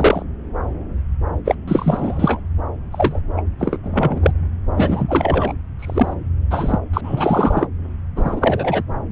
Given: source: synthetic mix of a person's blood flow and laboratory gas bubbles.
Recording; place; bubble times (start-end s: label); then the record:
Doppler ultrasound of blood flow; subclavian vein
0.00-0.23 s: bubbles
1.45-1.55 s: bubbles
1.68-2.40 s: bubbles
2.93-3.19 s: bubbles
3.37-3.42 s: bubbles
3.59-3.77 s: bubbles
3.83-4.32 s: bubbles
4.74-5.53 s: bubbles
5.79-6.14 s: bubbles
6.50-6.78 s: bubbles
6.93-7.01 s: bubbles
7.03-7.67 s: bubbles
8.16-8.83 s: bubbles
From the record:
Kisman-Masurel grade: 243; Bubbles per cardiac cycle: several, 3 to 8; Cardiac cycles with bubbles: 100%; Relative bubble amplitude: loud (0.450 to 0.775); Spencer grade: 3 (all of the cardiac periods contain showers or single bubble signals, but not dominating or overriding the cardiac motion signals); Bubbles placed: anywhere in the cardiac cycle